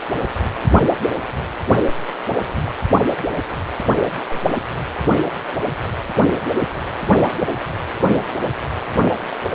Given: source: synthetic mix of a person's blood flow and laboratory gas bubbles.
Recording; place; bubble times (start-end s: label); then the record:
Doppler ultrasound of blood flow; precordium
2.64-2.72 s: bubbles
4.28-4.43 s: bubbles
7.38-7.48 s: bubbles
8.87-8.95 s: bubbles
From the record:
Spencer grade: 2 (many but less than half of the cardiac periods contain bubble signals, singularly or in groups); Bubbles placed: only in the low amplitude regions of the cardiac cycle